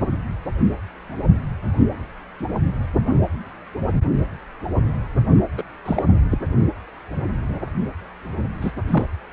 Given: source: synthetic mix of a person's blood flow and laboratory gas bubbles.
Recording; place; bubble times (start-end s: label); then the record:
Doppler ultrasound of blood flow; precordium
5.57-5.62 s: bubbles
5.85-6.02 s: bubbles
6.30-6.38 s: bubbles
8.61-8.72 s: bubbles
8.88-9.05 s: bubbles
From the record:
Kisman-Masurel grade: 223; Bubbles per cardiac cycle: several, 3 to 8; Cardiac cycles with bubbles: 10 to 50%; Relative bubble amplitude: loud (0.450 to 0.775); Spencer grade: 2 (many but less than half of the cardiac periods contain bubble signals, singularly or in groups); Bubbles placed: only in the low amplitude regions of the cardiac cycle